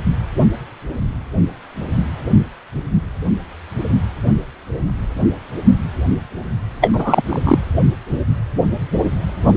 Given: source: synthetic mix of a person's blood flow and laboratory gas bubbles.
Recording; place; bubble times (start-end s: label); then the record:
Doppler ultrasound of blood flow; precordium
6.80-6.90 s: bubbles
6.93-7.22 s: bubbles
7.26-7.64 s: bubbles
From the record:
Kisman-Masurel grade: 213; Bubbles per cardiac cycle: several, 3 to 8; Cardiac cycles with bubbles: 1 to 10%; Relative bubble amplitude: loud (0.450 to 0.775); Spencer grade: 1 (occasional bubble signal discernible with the cardiac motion signal, with majority of cardiac periods free of bubbles); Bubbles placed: anywhere in the cardiac cycle